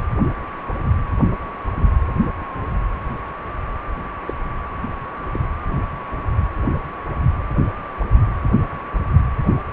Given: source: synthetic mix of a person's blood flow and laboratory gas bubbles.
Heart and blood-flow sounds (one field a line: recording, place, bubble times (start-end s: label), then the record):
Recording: Doppler ultrasound of blood flow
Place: precordium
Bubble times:
4.27-4.33 s: bubbles
5.33-5.38 s: bubbles
From the record:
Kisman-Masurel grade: 121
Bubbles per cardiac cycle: 1 to 2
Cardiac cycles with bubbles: 10 to 50%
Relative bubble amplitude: barely perceptible (0.100 to 0.250)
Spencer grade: 2 (many but less than half of the cardiac periods contain bubble signals, singularly or in groups)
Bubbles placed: anywhere in the cardiac cycle